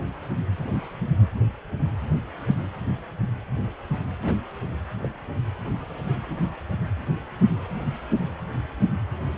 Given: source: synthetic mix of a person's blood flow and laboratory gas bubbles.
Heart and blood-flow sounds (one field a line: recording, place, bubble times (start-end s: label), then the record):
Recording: Doppler ultrasound of blood flow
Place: precordium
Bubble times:
4.22-4.33 s: bubbles
5.03-5.08 s: bubbles
From the record:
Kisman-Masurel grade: 111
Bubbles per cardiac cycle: 1 to 2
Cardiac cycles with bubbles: 1 to 10%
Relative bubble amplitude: barely perceptible (0.100 to 0.250)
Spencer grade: 1 (occasional bubble signal discernible with the cardiac motion signal, with majority of cardiac periods free of bubbles)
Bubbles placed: anywhere in the cardiac cycle